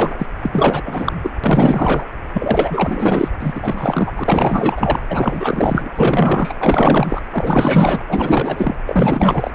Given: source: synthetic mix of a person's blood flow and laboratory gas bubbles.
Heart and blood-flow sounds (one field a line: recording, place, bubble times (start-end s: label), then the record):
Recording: Doppler ultrasound of blood flow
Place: precordium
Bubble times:
0.00-0.27 s: bubbles
0.41-0.82 s: bubbles
0.85-1.12 s: bubbles
1.22-1.31 s: bubbles
1.44-2.06 s: bubbles
2.33-3.28 s: bubbles
3.40-4.12 s: bubbles
4.17-5.00 s: bubbles
5.10-5.92 s: bubbles
5.95-6.54 s: bubbles
6.60-7.21 s: bubbles
7.31-8.01 s: bubbles
8.09-8.77 s: bubbles
8.87-9.51 s: bubbles
From the record:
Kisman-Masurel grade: 444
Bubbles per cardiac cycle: continuous sound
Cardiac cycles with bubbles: 100%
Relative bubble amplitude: maximal (0.775 to 0.999)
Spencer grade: 4 (maximum detectable bubble signal sounding continuously throughout systole and diastole of every cardiac period, and overriding the amplitude of the normal cardiac signals)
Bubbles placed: anywhere in the cardiac cycle